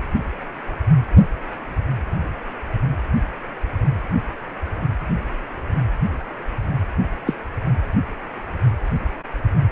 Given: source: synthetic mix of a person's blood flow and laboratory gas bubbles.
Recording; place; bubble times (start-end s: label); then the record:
Doppler ultrasound of blood flow; precordium
7.26-7.33 s: bubbles
From the record:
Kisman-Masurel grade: 112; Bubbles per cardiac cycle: 1 to 2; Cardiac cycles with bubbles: 1 to 10%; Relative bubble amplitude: moderate (0.250 to 0.450); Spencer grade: 1 (occasional bubble signal discernible with the cardiac motion signal, with majority of cardiac periods free of bubbles); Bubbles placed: anywhere in the cardiac cycle